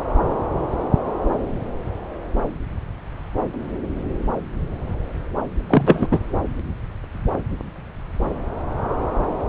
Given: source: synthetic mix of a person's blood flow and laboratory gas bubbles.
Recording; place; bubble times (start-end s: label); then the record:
Doppler ultrasound of blood flow; subclavian vein
5.70-6.07 s: bubbles
6.11-6.19 s: bubbles
From the record:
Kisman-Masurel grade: 213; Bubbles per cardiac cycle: several, 3 to 8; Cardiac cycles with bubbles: 1 to 10%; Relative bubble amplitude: loud (0.450 to 0.775); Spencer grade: 1 (occasional bubble signal discernible with the cardiac motion signal, with majority of cardiac periods free of bubbles); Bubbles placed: anywhere in the cardiac cycle